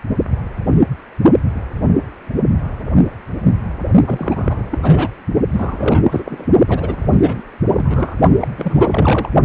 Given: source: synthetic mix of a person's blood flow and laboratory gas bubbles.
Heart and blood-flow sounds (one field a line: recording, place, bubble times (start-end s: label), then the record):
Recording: Doppler ultrasound of blood flow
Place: precordium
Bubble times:
4.06-4.63 s: bubbles
4.71-4.79 s: bubbles
4.83-5.10 s: bubbles
5.54-6.46 s: bubbles
6.67-7.42 s: bubbles
7.66-8.16 s: bubbles
8.40-8.48 s: bubbles
8.57-9.29 s: bubbles
From the record:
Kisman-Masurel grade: 333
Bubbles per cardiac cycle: rolling drumbeat, 9 or more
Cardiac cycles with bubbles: 50 to 99%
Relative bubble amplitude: loud (0.450 to 0.775)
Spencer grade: 3 (all of the cardiac periods contain showers or single bubble signals, but not dominating or overriding the cardiac motion signals)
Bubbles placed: only in the low amplitude regions of the cardiac cycle